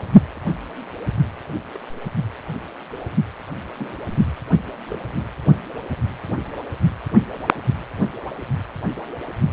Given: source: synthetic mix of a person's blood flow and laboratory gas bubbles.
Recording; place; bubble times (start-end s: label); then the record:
Doppler ultrasound of blood flow; precordium
1.73-1.78 s: bubbles
3.77-4.00 s: bubbles
4.90-4.97 s: bubbles
From the record:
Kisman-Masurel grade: 121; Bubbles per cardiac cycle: 1 to 2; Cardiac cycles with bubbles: 10 to 50%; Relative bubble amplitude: barely perceptible (0.100 to 0.250); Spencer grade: 2 (many but less than half of the cardiac periods contain bubble signals, singularly or in groups); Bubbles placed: anywhere in the cardiac cycle